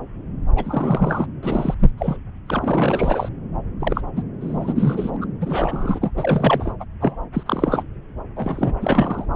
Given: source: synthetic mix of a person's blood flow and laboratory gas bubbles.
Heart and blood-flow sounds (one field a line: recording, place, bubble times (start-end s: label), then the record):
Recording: Doppler ultrasound of blood flow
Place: subclavian vein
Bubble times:
0.55-1.26 s: bubbles
1.42-1.74 s: bubbles
1.79-1.91 s: bubbles
1.97-2.17 s: bubbles
2.48-3.29 s: bubbles
3.79-4.01 s: bubbles
4.16-4.23 s: bubbles
4.41-5.11 s: bubbles
5.14-5.17 s: bubbles
5.21-5.25 s: bubbles
5.41-6.11 s: bubbles
6.17-6.73 s: bubbles
6.79-6.85 s: bubbles
7.00-7.16 s: bubbles
7.33-7.43 s: bubbles
7.46-7.83 s: bubbles
8.36-8.74 s: bubbles
8.80-9.26 s: bubbles
From the record:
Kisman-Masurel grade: 332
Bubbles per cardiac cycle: rolling drumbeat, 9 or more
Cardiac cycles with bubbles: 50 to 99%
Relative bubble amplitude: moderate (0.250 to 0.450)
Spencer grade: 3 (all of the cardiac periods contain showers or single bubble signals, but not dominating or overriding the cardiac motion signals)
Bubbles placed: anywhere in the cardiac cycle